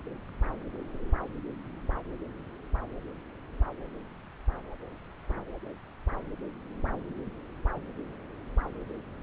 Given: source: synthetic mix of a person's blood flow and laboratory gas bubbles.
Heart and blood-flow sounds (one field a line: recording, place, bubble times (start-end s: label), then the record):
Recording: Doppler ultrasound of blood flow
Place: subclavian vein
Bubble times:
no bubbles
From the record:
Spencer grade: 0 (complete lack of bubble signals)